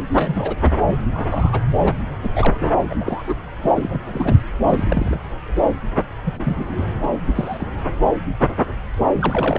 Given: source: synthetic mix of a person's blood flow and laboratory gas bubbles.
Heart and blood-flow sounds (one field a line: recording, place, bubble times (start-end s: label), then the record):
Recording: Doppler ultrasound of blood flow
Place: subclavian vein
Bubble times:
0.12-0.55 s: bubbles
0.61-0.71 s: bubbles
1.12-1.59 s: bubbles
1.77-1.93 s: bubbles
2.23-2.29 s: bubbles
2.35-2.68 s: bubbles
2.90-2.94 s: bubbles
3.00-3.23 s: bubbles
3.27-3.35 s: bubbles
3.63-3.70 s: bubbles
3.76-4.44 s: bubbles
4.67-5.19 s: bubbles
6.25-6.93 s: bubbles
7.03-7.08 s: bubbles
7.35-7.68 s: bubbles
9.12-9.59 s: bubbles
From the record:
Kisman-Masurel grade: 232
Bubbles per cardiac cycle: several, 3 to 8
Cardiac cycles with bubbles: 50 to 99%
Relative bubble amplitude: moderate (0.250 to 0.450)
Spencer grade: 3 (all of the cardiac periods contain showers or single bubble signals, but not dominating or overriding the cardiac motion signals)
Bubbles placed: anywhere in the cardiac cycle